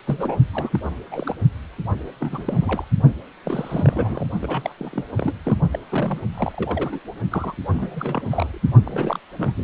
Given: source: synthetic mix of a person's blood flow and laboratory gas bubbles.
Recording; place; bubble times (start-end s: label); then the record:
Doppler ultrasound of blood flow; precordium
0.07-0.36 s: bubbles
0.52-0.79 s: bubbles
1.11-1.35 s: bubbles
2.21-2.85 s: bubbles
3.45-4.26 s: bubbles
4.41-4.73 s: bubbles
4.78-5.05 s: bubbles
5.17-5.36 s: bubbles
5.45-5.57 s: bubbles
5.73-5.79 s: bubbles
5.89-6.21 s: bubbles
6.34-7.00 s: bubbles
7.30-7.55 s: bubbles
7.71-8.61 s: bubbles
8.84-9.20 s: bubbles
9.38-9.52 s: bubbles
9.57-9.64 s: bubbles
From the record:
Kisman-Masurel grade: 342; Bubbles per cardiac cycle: rolling drumbeat, 9 or more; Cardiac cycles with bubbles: 100%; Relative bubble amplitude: moderate (0.250 to 0.450); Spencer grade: 3 (all of the cardiac periods contain showers or single bubble signals, but not dominating or overriding the cardiac motion signals); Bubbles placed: only in the low amplitude regions of the cardiac cycle